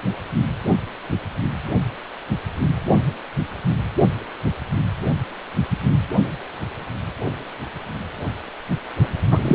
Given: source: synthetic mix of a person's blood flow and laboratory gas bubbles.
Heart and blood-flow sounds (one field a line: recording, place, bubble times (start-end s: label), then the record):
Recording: Doppler ultrasound of blood flow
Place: precordium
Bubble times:
9.31-9.39 s: bubbles
9.42-9.55 s: bubbles
From the record:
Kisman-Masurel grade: 213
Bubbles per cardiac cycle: several, 3 to 8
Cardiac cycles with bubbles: 1 to 10%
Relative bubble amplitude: loud (0.450 to 0.775)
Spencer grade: 1 (occasional bubble signal discernible with the cardiac motion signal, with majority of cardiac periods free of bubbles)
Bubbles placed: anywhere in the cardiac cycle